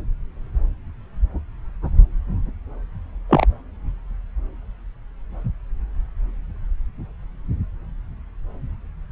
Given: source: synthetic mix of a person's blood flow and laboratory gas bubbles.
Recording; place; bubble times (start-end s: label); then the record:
Doppler ultrasound of blood flow; subclavian vein
3.29-3.46 s: bubbles
From the record:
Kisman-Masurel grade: 113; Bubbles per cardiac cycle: 1 to 2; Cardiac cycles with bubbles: 1 to 10%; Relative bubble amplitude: loud (0.450 to 0.775); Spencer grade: 1 (occasional bubble signal discernible with the cardiac motion signal, with majority of cardiac periods free of bubbles); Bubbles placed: anywhere in the cardiac cycle